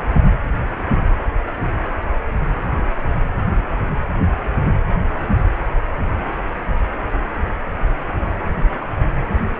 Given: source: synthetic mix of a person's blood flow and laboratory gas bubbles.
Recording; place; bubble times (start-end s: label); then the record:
Doppler ultrasound of blood flow; precordium
0.14-0.20 s: bubbles
0.23-0.27 s: bubbles
5.17-5.40 s: bubbles
6.18-6.24 s: bubbles
8.81-8.87 s: bubbles
9.31-9.41 s: bubbles
From the record:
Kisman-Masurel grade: 121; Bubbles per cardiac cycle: 1 to 2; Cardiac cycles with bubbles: 10 to 50%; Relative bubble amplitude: barely perceptible (0.100 to 0.250); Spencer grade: 2 (many but less than half of the cardiac periods contain bubble signals, singularly or in groups); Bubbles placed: anywhere in the cardiac cycle